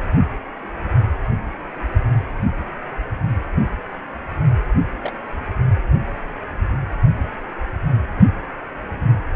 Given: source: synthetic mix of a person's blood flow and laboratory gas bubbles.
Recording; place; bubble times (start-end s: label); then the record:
Doppler ultrasound of blood flow; precordium
5.01-5.13 s: bubbles
5.16-5.20 s: bubbles
From the record:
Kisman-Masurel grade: 121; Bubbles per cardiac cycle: 1 to 2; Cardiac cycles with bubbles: 10 to 50%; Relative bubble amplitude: barely perceptible (0.100 to 0.250); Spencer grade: 2 (many but less than half of the cardiac periods contain bubble signals, singularly or in groups); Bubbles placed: only in the low amplitude regions of the cardiac cycle